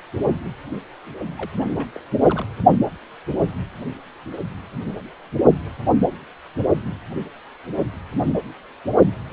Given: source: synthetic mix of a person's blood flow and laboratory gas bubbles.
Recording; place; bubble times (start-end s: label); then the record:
Doppler ultrasound of blood flow; precordium
1.38-1.50 s: bubbles
1.56-1.64 s: bubbles
1.77-1.88 s: bubbles
1.96-2.00 s: bubbles
2.21-2.46 s: bubbles
From the record:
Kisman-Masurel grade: 211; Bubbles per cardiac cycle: several, 3 to 8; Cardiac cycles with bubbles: 1 to 10%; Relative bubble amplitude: barely perceptible (0.100 to 0.250); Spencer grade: 1 (occasional bubble signal discernible with the cardiac motion signal, with majority of cardiac periods free of bubbles); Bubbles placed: only in the low amplitude regions of the cardiac cycle